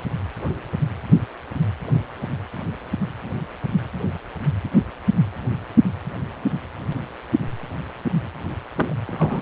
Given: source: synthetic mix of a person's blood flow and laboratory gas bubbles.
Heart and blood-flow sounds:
Doppler ultrasound of blood flow; precordium
8.75-8.94 s: bubbles
9.07-9.42 s: bubbles
From the record:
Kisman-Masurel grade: 212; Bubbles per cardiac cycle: several, 3 to 8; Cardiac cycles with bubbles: 1 to 10%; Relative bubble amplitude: moderate (0.250 to 0.450); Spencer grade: 1 (occasional bubble signal discernible with the cardiac motion signal, with majority of cardiac periods free of bubbles); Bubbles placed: anywhere in the cardiac cycle

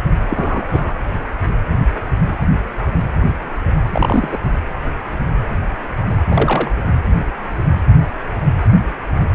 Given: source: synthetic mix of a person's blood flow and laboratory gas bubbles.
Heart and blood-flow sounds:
Doppler ultrasound of blood flow; precordium
0.29-0.93 s: bubbles
3.90-4.39 s: bubbles
6.31-6.71 s: bubbles
From the record:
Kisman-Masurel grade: 123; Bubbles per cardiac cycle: 1 to 2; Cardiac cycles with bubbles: 10 to 50%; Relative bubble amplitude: loud (0.450 to 0.775); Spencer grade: 2 (many but less than half of the cardiac periods contain bubble signals, singularly or in groups); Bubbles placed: anywhere in the cardiac cycle

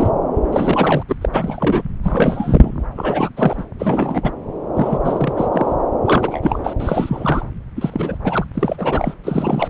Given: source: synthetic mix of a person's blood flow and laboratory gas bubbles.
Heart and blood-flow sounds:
Doppler ultrasound of blood flow; subclavian vein
0.00-0.11 s: bubbles
0.50-1.03 s: bubbles
1.09-1.16 s: bubbles
1.21-1.27 s: bubbles
1.32-1.82 s: bubbles
2.03-2.85 s: bubbles
2.96-3.29 s: bubbles
3.37-3.65 s: bubbles
3.79-4.31 s: bubbles
4.75-4.98 s: bubbles
5.04-5.33 s: bubbles
5.36-5.48 s: bubbles
5.52-5.76 s: bubbles
6.04-6.60 s: bubbles
6.64-6.73 s: bubbles
6.79-7.46 s: bubbles
7.76-8.18 s: bubbles
8.22-8.45 s: bubbles
8.54-9.14 s: bubbles
9.23-9.68 s: bubbles
From the record:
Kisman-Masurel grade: 342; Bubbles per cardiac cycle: rolling drumbeat, 9 or more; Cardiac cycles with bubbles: 100%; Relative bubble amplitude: moderate (0.250 to 0.450); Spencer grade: 3 (all of the cardiac periods contain showers or single bubble signals, but not dominating or overriding the cardiac motion signals); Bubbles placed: anywhere in the cardiac cycle

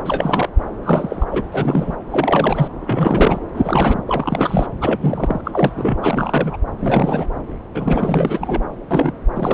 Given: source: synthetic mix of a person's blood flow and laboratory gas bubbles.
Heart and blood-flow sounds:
Doppler ultrasound of blood flow; subclavian vein
0.05-0.49 s: bubbles
0.82-1.25 s: bubbles
1.31-1.44 s: bubbles
1.52-1.95 s: bubbles
2.10-2.68 s: bubbles
2.81-3.40 s: bubbles
3.54-3.98 s: bubbles
4.07-4.67 s: bubbles
4.81-5.41 s: bubbles
5.44-5.97 s: bubbles
6.02-6.56 s: bubbles
6.79-7.26 s: bubbles
7.75-8.62 s: bubbles
8.91-9.12 s: bubbles
9.33-9.54 s: bubbles
From the record:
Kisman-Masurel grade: 342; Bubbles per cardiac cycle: rolling drumbeat, 9 or more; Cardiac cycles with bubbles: 100%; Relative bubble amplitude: moderate (0.250 to 0.450); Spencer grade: 3 (all of the cardiac periods contain showers or single bubble signals, but not dominating or overriding the cardiac motion signals); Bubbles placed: anywhere in the cardiac cycle

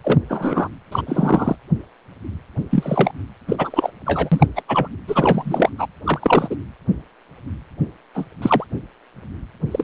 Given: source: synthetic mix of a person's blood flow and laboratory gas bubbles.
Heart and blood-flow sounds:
Doppler ultrasound of blood flow; precordium
0.04-0.18 s: bubbles
0.28-0.68 s: bubbles
0.91-1.02 s: bubbles
1.06-1.56 s: bubbles
2.71-3.11 s: bubbles
3.48-3.91 s: bubbles
4.06-4.46 s: bubbles
4.55-4.62 s: bubbles
4.68-4.88 s: bubbles
5.08-5.70 s: bubbles
5.78-5.88 s: bubbles
6.03-6.56 s: bubbles
8.14-8.25 s: bubbles
8.41-8.64 s: bubbles
9.71-9.84 s: bubbles
From the record:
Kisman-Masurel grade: 233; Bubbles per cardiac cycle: several, 3 to 8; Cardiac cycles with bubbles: 50 to 99%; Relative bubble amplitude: loud (0.450 to 0.775); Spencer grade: 3 (all of the cardiac periods contain showers or single bubble signals, but not dominating or overriding the cardiac motion signals); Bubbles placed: anywhere in the cardiac cycle

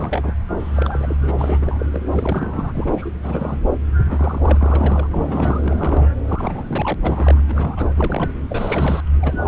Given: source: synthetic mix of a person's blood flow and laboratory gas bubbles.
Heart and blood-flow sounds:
Doppler ultrasound of blood flow; subclavian vein
0.00-0.33 s: bubbles
0.56-1.16 s: bubbles
1.21-1.86 s: bubbles
1.91-2.01 s: bubbles
2.11-2.72 s: bubbles
2.74-3.11 s: bubbles
3.22-3.60 s: bubbles
4.08-5.07 s: bubbles
5.11-6.09 s: bubbles
6.28-6.95 s: bubbles
7.03-7.42 s: bubbles
7.48-7.91 s: bubbles
7.97-8.30 s: bubbles
8.49-9.01 s: bubbles
9.21-9.48 s: bubbles
From the record:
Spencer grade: 3 (all of the cardiac periods contain showers or single bubble signals, but not dominating or overriding the cardiac motion signals); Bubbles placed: anywhere in the cardiac cycle

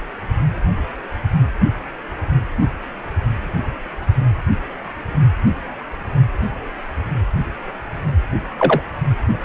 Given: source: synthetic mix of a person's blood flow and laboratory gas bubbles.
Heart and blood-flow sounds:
Doppler ultrasound of blood flow; precordium
8.59-8.83 s: bubbles
From the record:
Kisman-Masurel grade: 113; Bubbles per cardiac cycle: 1 to 2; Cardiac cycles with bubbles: 1 to 10%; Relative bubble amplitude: loud (0.450 to 0.775); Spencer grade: 1 (occasional bubble signal discernible with the cardiac motion signal, with majority of cardiac periods free of bubbles); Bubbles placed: anywhere in the cardiac cycle

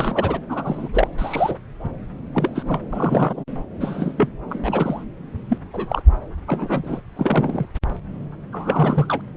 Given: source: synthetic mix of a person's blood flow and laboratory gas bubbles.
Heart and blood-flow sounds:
Doppler ultrasound of blood flow; subclavian vein
0.00-0.37 s: bubbles
0.49-0.89 s: bubbles
0.93-1.07 s: bubbles
1.18-1.56 s: bubbles
2.33-2.80 s: bubbles
2.92-3.44 s: bubbles
3.80-4.14 s: bubbles
4.17-4.28 s: bubbles
4.49-5.04 s: bubbles
5.49-5.58 s: bubbles
5.73-6.02 s: bubbles
6.46-7.01 s: bubbles
7.15-7.66 s: bubbles
8.53-9.21 s: bubbles
From the record:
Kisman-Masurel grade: 232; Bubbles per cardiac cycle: several, 3 to 8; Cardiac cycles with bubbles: 50 to 99%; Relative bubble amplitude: moderate (0.250 to 0.450); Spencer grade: 3 (all of the cardiac periods contain showers or single bubble signals, but not dominating or overriding the cardiac motion signals); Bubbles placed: anywhere in the cardiac cycle

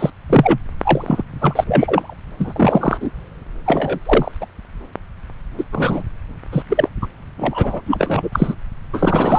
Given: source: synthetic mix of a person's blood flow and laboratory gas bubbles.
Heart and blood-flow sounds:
Doppler ultrasound of blood flow; subclavian vein
0.00-0.10 s: bubbles
0.29-0.58 s: bubbles
0.80-1.23 s: bubbles
1.41-1.64 s: bubbles
1.68-2.15 s: bubbles
2.38-3.10 s: bubbles
3.65-3.99 s: bubbles
4.05-4.32 s: bubbles
4.40-4.46 s: bubbles
5.58-5.64 s: bubbles
5.72-6.03 s: bubbles
6.51-6.62 s: bubbles
6.69-6.88 s: bubbles
7.01-7.07 s: bubbles
7.38-7.81 s: bubbles
7.86-8.55 s: bubbles
8.93-9.39 s: bubbles
From the record:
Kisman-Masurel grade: 243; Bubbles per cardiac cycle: several, 3 to 8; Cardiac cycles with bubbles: 100%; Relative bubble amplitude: loud (0.450 to 0.775); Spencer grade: 3 (all of the cardiac periods contain showers or single bubble signals, but not dominating or overriding the cardiac motion signals); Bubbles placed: anywhere in the cardiac cycle

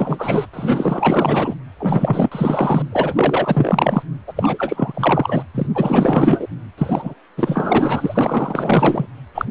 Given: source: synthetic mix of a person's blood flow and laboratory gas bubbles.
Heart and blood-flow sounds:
Doppler ultrasound of blood flow; precordium
0.00-0.46 s: bubbles
0.53-1.55 s: bubbles
1.78-2.83 s: bubbles
2.92-4.03 s: bubbles
4.27-4.33 s: bubbles
4.35-5.43 s: bubbles
5.53-5.67 s: bubbles
5.75-6.46 s: bubbles
6.77-7.14 s: bubbles
7.37-9.06 s: bubbles
9.34-9.45 s: bubbles
From the record:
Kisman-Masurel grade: 444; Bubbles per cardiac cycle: continuous sound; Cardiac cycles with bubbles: 100%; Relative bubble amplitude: maximal (0.775 to 0.999); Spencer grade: 4 (maximum detectable bubble signal sounding continuously throughout systole and diastole of every cardiac period, and overriding the amplitude of the normal cardiac signals); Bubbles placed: anywhere in the cardiac cycle

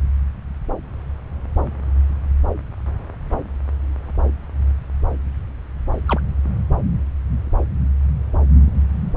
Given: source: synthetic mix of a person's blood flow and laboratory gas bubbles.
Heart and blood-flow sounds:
Doppler ultrasound of blood flow; subclavian vein
6.08-6.21 s: bubbles
From the record:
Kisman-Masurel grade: 112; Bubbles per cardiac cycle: 1 to 2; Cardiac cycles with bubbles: 1 to 10%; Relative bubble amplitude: moderate (0.250 to 0.450); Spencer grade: 1 (occasional bubble signal discernible with the cardiac motion signal, with majority of cardiac periods free of bubbles); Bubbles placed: anywhere in the cardiac cycle

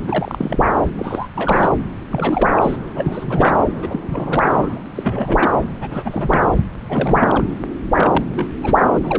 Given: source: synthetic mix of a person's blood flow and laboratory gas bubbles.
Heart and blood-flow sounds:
Doppler ultrasound of blood flow; subclavian vein
0.04-0.66 s: bubbles
0.70-0.82 s: bubbles
0.96-1.28 s: bubbles
1.35-1.73 s: bubbles
2.11-2.50 s: bubbles
2.56-2.76 s: bubbles
2.94-3.52 s: bubbles
3.82-4.00 s: bubbles
4.09-4.81 s: bubbles
4.95-5.50 s: bubbles
5.59-5.65 s: bubbles
5.80-6.48 s: bubbles
6.89-7.44 s: bubbles
7.96-8.23 s: bubbles
8.34-8.46 s: bubbles
8.62-8.83 s: bubbles
8.94-8.99 s: bubbles
9.03-9.19 s: bubbles
From the record:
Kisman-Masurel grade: 342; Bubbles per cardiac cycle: rolling drumbeat, 9 or more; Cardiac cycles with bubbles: 100%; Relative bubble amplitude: moderate (0.250 to 0.450); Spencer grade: 3 (all of the cardiac periods contain showers or single bubble signals, but not dominating or overriding the cardiac motion signals); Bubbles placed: anywhere in the cardiac cycle

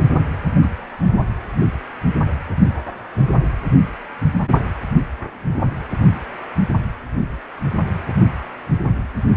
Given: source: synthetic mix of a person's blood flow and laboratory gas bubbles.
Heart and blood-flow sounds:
Doppler ultrasound of blood flow; precordium
0.62-0.67 s: bubbles
From the record:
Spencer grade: 1 (occasional bubble signal discernible with the cardiac motion signal, with majority of cardiac periods free of bubbles); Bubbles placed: only in the low amplitude regions of the cardiac cycle

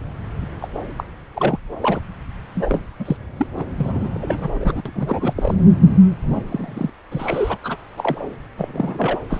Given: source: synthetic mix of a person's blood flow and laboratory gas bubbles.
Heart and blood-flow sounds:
Doppler ultrasound of blood flow; subclavian vein
0.60-0.68 s: bubbles
0.98-1.03 s: bubbles
1.33-1.58 s: bubbles
1.81-2.00 s: bubbles
2.55-2.86 s: bubbles
2.99-3.17 s: bubbles
3.37-3.47 s: bubbles
3.53-3.63 s: bubbles
3.77-4.08 s: bubbles
4.15-4.82 s: bubbles
4.86-5.33 s: bubbles
5.36-5.54 s: bubbles
6.32-6.42 s: bubbles
6.48-6.93 s: bubbles
7.11-7.58 s: bubbles
7.64-7.77 s: bubbles
7.96-8.21 s: bubbles
8.57-9.19 s: bubbles
9.29-9.40 s: bubbles
From the record:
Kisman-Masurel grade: 342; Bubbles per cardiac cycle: rolling drumbeat, 9 or more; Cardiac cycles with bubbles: 100%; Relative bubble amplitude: moderate (0.250 to 0.450); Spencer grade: 3 (all of the cardiac periods contain showers or single bubble signals, but not dominating or overriding the cardiac motion signals); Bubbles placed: anywhere in the cardiac cycle

